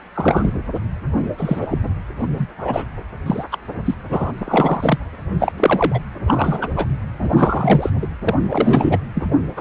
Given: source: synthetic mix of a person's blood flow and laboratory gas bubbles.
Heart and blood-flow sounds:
Doppler ultrasound of blood flow; precordium
0.14-0.52 s: bubbles
1.38-1.67 s: bubbles
1.71-1.78 s: bubbles
2.21-2.27 s: bubbles
2.32-2.46 s: bubbles
2.59-2.85 s: bubbles
3.26-3.44 s: bubbles
3.52-3.58 s: bubbles
3.85-3.95 s: bubbles
4.10-4.32 s: bubbles
4.38-4.99 s: bubbles
5.39-5.52 s: bubbles
5.57-5.99 s: bubbles
6.27-6.87 s: bubbles
7.22-7.90 s: bubbles
8.02-8.06 s: bubbles
8.24-8.35 s: bubbles
8.50-8.98 s: bubbles
9.14-9.26 s: bubbles
9.56-9.61 s: bubbles
From the record:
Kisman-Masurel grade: 243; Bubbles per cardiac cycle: several, 3 to 8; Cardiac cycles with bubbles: 100%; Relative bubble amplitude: loud (0.450 to 0.775); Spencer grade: 3 (all of the cardiac periods contain showers or single bubble signals, but not dominating or overriding the cardiac motion signals); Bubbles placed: anywhere in the cardiac cycle

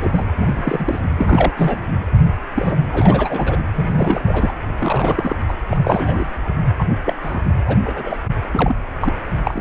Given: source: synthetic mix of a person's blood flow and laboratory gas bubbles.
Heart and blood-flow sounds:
Doppler ultrasound of blood flow; precordium
0.00-0.29 s: bubbles
0.38-1.01 s: bubbles
1.17-1.53 s: bubbles
1.56-1.82 s: bubbles
2.54-2.87 s: bubbles
2.92-3.56 s: bubbles
3.75-4.53 s: bubbles
4.78-5.36 s: bubbles
5.48-5.55 s: bubbles
5.71-6.29 s: bubbles
6.77-6.84 s: bubbles
7.05-7.13 s: bubbles
7.22-7.42 s: bubbles
7.66-7.77 s: bubbles
7.84-8.17 s: bubbles
8.53-8.76 s: bubbles
9.01-9.12 s: bubbles
9.45-9.61 s: bubbles
From the record:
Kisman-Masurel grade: 232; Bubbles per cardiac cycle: several, 3 to 8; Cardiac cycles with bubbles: 50 to 99%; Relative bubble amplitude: moderate (0.250 to 0.450); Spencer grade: 3 (all of the cardiac periods contain showers or single bubble signals, but not dominating or overriding the cardiac motion signals); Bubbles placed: anywhere in the cardiac cycle

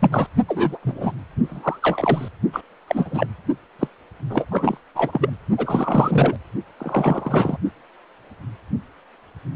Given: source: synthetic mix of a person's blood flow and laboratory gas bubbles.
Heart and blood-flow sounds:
Doppler ultrasound of blood flow; precordium
0.00-0.27 s: bubbles
0.47-0.78 s: bubbles
0.82-1.12 s: bubbles
1.44-2.29 s: bubbles
2.52-2.61 s: bubbles
2.87-3.27 s: bubbles
3.79-3.88 s: bubbles
4.29-4.45 s: bubbles
4.51-4.79 s: bubbles
4.95-5.30 s: bubbles
5.58-6.36 s: bubbles
6.78-7.57 s: bubbles
From the record:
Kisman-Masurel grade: 333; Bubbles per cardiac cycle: rolling drumbeat, 9 or more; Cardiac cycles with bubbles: 50 to 99%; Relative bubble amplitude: loud (0.450 to 0.775); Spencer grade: 3 (all of the cardiac periods contain showers or single bubble signals, but not dominating or overriding the cardiac motion signals); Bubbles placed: only in the low amplitude regions of the cardiac cycle

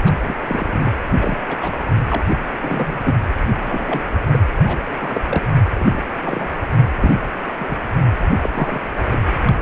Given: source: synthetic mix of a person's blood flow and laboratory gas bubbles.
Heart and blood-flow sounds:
Doppler ultrasound of blood flow; precordium
0.04-0.14 s: bubbles
0.25-0.35 s: bubbles
0.42-0.92 s: bubbles
1.21-1.41 s: bubbles
1.48-1.77 s: bubbles
2.08-2.22 s: bubbles
2.29-2.37 s: bubbles
2.60-3.00 s: bubbles
3.05-3.15 s: bubbles
3.62-4.01 s: bubbles
4.32-4.39 s: bubbles
4.63-4.92 s: bubbles
5.00-5.21 s: bubbles
5.28-5.50 s: bubbles
5.78-6.03 s: bubbles
6.20-6.49 s: bubbles
7.03-7.20 s: bubbles
7.58-7.77 s: bubbles
8.27-8.49 s: bubbles
8.54-8.88 s: bubbles
9.11-9.19 s: bubbles
9.46-9.53 s: bubbles
9.57-9.62 s: bubbles
From the record:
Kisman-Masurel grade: 242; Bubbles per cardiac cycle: several, 3 to 8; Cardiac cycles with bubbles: 100%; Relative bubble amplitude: moderate (0.250 to 0.450); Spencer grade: 3 (all of the cardiac periods contain showers or single bubble signals, but not dominating or overriding the cardiac motion signals); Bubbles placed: anywhere in the cardiac cycle

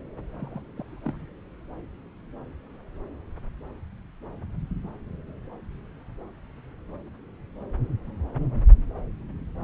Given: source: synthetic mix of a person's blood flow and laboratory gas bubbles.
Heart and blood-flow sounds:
Doppler ultrasound of blood flow; subclavian vein
0.39-0.61 s: bubbles
0.76-0.99 s: bubbles
1.05-1.26 s: bubbles
From the record:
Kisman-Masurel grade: 211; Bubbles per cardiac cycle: several, 3 to 8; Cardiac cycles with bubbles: 1 to 10%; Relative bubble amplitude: barely perceptible (0.100 to 0.250); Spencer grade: 1 (occasional bubble signal discernible with the cardiac motion signal, with majority of cardiac periods free of bubbles); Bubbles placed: anywhere in the cardiac cycle

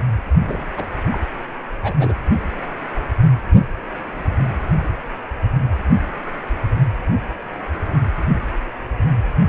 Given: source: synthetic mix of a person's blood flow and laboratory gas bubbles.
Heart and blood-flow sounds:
Doppler ultrasound of blood flow; precordium
0.45-0.65 s: bubbles
0.76-0.84 s: bubbles
1.11-1.18 s: bubbles
1.82-1.94 s: bubbles
1.99-2.16 s: bubbles
From the record:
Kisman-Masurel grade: 211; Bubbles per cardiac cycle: several, 3 to 8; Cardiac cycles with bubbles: 1 to 10%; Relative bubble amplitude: barely perceptible (0.100 to 0.250); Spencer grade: 1 (occasional bubble signal discernible with the cardiac motion signal, with majority of cardiac periods free of bubbles); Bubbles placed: only in the low amplitude regions of the cardiac cycle

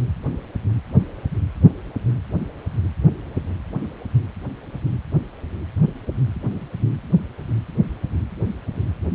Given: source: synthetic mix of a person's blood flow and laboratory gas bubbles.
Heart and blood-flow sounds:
Doppler ultrasound of blood flow; precordium
no bubbles
From the record:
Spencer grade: 0 (complete lack of bubble signals)

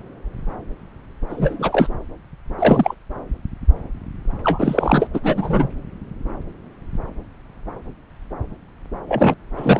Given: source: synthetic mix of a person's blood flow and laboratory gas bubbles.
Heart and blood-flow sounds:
Doppler ultrasound of blood flow; subclavian vein
1.29-1.89 s: bubbles
2.58-2.95 s: bubbles
4.43-5.07 s: bubbles
5.13-5.20 s: bubbles
5.23-5.68 s: bubbles
9.08-9.35 s: bubbles
9.57-9.79 s: bubbles
From the record:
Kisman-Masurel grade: 223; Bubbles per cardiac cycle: several, 3 to 8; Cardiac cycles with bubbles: 10 to 50%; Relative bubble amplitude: loud (0.450 to 0.775); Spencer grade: 2 (many but less than half of the cardiac periods contain bubble signals, singularly or in groups); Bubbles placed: anywhere in the cardiac cycle

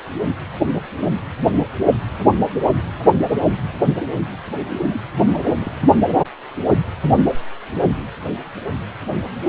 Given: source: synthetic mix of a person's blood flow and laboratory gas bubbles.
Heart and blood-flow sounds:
Doppler ultrasound of blood flow; precordium
4.70-4.79 s: bubbles
4.89-5.02 s: bubbles
5.17-5.31 s: bubbles
5.43-5.53 s: bubbles
5.59-5.71 s: bubbles
From the record:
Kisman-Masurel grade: 211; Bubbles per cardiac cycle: several, 3 to 8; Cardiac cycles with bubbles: 1 to 10%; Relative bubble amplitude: barely perceptible (0.100 to 0.250); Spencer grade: 1 (occasional bubble signal discernible with the cardiac motion signal, with majority of cardiac periods free of bubbles); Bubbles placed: only in the low amplitude regions of the cardiac cycle

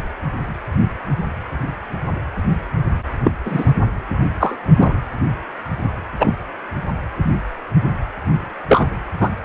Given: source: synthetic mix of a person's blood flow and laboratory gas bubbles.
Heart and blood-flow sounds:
Doppler ultrasound of blood flow; precordium
3.24-3.31 s: bubbles
3.44-3.72 s: bubbles
4.40-4.56 s: bubbles
4.76-4.93 s: bubbles
6.19-6.34 s: bubbles
8.69-8.88 s: bubbles
9.20-9.29 s: bubbles
From the record:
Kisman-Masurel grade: 123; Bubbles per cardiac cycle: 1 to 2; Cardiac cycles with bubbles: 10 to 50%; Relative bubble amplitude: loud (0.450 to 0.775); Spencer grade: 2 (many but less than half of the cardiac periods contain bubble signals, singularly or in groups); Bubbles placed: anywhere in the cardiac cycle

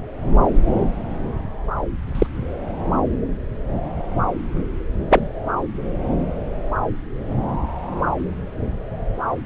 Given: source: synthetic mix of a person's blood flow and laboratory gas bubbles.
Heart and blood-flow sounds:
Doppler ultrasound of blood flow; subclavian vein
2.15-2.27 s: bubbles
5.09-5.28 s: bubbles
From the record:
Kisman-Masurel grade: 123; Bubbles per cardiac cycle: 1 to 2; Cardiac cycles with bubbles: 10 to 50%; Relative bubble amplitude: loud (0.450 to 0.775); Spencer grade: 2 (many but less than half of the cardiac periods contain bubble signals, singularly or in groups); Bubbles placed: anywhere in the cardiac cycle

